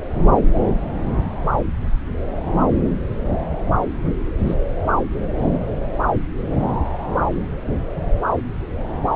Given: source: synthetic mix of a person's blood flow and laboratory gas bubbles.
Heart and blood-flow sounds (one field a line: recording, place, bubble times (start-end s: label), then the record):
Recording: Doppler ultrasound of blood flow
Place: subclavian vein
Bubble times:
4.37-4.54 s: bubbles
From the record:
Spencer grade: 2 (many but less than half of the cardiac periods contain bubble signals, singularly or in groups)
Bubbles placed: anywhere in the cardiac cycle